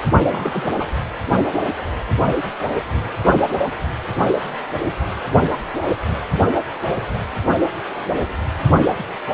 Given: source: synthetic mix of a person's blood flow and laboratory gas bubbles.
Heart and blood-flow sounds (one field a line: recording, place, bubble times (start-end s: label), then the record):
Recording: Doppler ultrasound of blood flow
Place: precordium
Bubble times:
0.12-0.25 s: bubbles
0.31-0.74 s: bubbles
0.79-0.87 s: bubbles
From the record:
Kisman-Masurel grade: 211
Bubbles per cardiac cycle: several, 3 to 8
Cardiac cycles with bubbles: 1 to 10%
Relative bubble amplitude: barely perceptible (0.100 to 0.250)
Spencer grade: 1 (occasional bubble signal discernible with the cardiac motion signal, with majority of cardiac periods free of bubbles)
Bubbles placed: anywhere in the cardiac cycle